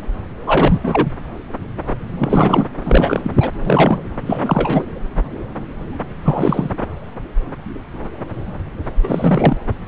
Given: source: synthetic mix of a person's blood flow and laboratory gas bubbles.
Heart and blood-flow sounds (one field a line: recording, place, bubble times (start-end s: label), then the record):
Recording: Doppler ultrasound of blood flow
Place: subclavian vein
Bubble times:
0.46-0.78 s: bubbles
0.83-1.07 s: bubbles
2.19-2.66 s: bubbles
2.85-3.31 s: bubbles
3.37-3.51 s: bubbles
3.65-3.99 s: bubbles
4.26-4.86 s: bubbles
6.25-6.71 s: bubbles
9.03-9.57 s: bubbles
From the record:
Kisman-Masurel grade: 333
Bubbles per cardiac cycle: rolling drumbeat, 9 or more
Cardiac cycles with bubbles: 50 to 99%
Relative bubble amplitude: loud (0.450 to 0.775)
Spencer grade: 3 (all of the cardiac periods contain showers or single bubble signals, but not dominating or overriding the cardiac motion signals)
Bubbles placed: anywhere in the cardiac cycle